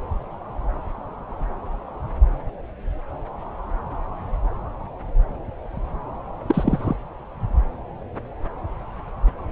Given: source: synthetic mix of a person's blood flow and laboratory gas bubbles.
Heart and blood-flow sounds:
Doppler ultrasound of blood flow; subclavian vein
6.48-6.96 s: bubbles
From the record:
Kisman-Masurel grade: 212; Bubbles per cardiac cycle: several, 3 to 8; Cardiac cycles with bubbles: 1 to 10%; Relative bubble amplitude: moderate (0.250 to 0.450); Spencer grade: 1 (occasional bubble signal discernible with the cardiac motion signal, with majority of cardiac periods free of bubbles); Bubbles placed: anywhere in the cardiac cycle

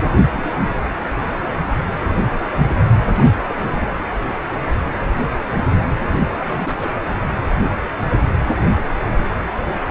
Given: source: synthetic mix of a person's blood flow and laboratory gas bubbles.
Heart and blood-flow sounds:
Doppler ultrasound of blood flow; precordium
0.26-0.31 s: bubbles
0.33-0.59 s: bubbles
0.79-0.93 s: bubbles
1.15-1.22 s: bubbles
1.48-1.58 s: bubbles
2.04-2.82 s: bubbles
3.06-3.61 s: bubbles
3.76-3.98 s: bubbles
6.31-6.94 s: bubbles
From the record:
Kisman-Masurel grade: 221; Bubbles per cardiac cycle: several, 3 to 8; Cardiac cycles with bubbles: 10 to 50%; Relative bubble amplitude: barely perceptible (0.100 to 0.250); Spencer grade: 2 (many but less than half of the cardiac periods contain bubble signals, singularly or in groups); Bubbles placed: anywhere in the cardiac cycle

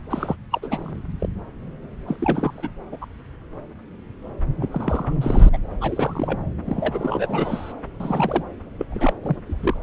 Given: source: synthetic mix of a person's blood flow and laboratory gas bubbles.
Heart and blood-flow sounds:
Doppler ultrasound of blood flow; subclavian vein
0.10-0.35 s: bubbles
0.51-1.01 s: bubbles
1.19-1.29 s: bubbles
2.08-2.69 s: bubbles
2.92-2.98 s: bubbles
3.02-3.05 s: bubbles
4.60-5.13 s: bubbles
5.21-5.50 s: bubbles
5.53-5.58 s: bubbles
5.81-6.41 s: bubbles
6.65-7.73 s: bubbles
8.00-8.44 s: bubbles
8.79-8.85 s: bubbles
8.89-9.13 s: bubbles
9.22-9.37 s: bubbles
9.46-9.76 s: bubbles
From the record:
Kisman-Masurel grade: 332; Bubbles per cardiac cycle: rolling drumbeat, 9 or more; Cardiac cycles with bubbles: 50 to 99%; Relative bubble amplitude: moderate (0.250 to 0.450); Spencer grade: 3 (all of the cardiac periods contain showers or single bubble signals, but not dominating or overriding the cardiac motion signals); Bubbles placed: anywhere in the cardiac cycle

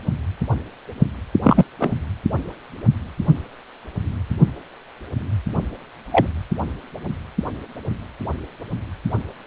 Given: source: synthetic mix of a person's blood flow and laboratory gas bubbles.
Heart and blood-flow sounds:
Doppler ultrasound of blood flow; precordium
1.43-1.64 s: bubbles
1.80-1.91 s: bubbles
6.11-6.27 s: bubbles
From the record:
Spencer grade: 2 (many but less than half of the cardiac periods contain bubble signals, singularly or in groups); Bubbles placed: only in the low amplitude regions of the cardiac cycle

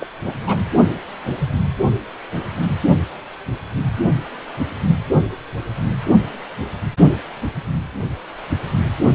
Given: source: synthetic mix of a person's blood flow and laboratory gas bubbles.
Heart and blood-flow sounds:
Doppler ultrasound of blood flow; precordium
0.00-0.07 s: bubbles
0.26-0.33 s: bubbles
0.46-0.57 s: bubbles
From the record:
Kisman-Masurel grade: 222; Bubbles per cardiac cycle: several, 3 to 8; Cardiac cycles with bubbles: 10 to 50%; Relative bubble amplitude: moderate (0.250 to 0.450); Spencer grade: 2 (many but less than half of the cardiac periods contain bubble signals, singularly or in groups); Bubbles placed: anywhere in the cardiac cycle

